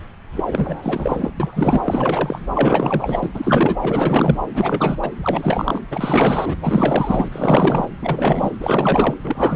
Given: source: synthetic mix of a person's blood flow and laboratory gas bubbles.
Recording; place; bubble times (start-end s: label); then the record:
Doppler ultrasound of blood flow; subclavian vein
0.31-0.44 s: bubbles
0.47-1.33 s: bubbles
1.40-1.81 s: bubbles
1.84-2.41 s: bubbles
2.54-3.30 s: bubbles
3.33-3.77 s: bubbles
3.81-4.39 s: bubbles
4.53-5.11 s: bubbles
5.22-5.81 s: bubbles
5.90-6.56 s: bubbles
6.61-7.88 s: bubbles
8.01-8.56 s: bubbles
8.59-9.14 s: bubbles
9.20-9.56 s: bubbles
From the record:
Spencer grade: 4 (maximum detectable bubble signal sounding continuously throughout systole and diastole of every cardiac period, and overriding the amplitude of the normal cardiac signals); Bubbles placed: anywhere in the cardiac cycle